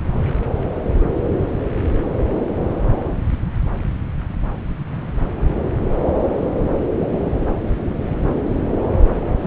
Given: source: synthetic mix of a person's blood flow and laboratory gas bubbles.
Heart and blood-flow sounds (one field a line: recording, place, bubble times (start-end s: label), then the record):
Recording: Doppler ultrasound of blood flow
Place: subclavian vein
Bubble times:
9.40-9.47 s: bubbles
From the record:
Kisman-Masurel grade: 211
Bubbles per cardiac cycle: several, 3 to 8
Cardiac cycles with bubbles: 1 to 10%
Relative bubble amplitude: barely perceptible (0.100 to 0.250)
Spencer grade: 1 (occasional bubble signal discernible with the cardiac motion signal, with majority of cardiac periods free of bubbles)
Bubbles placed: anywhere in the cardiac cycle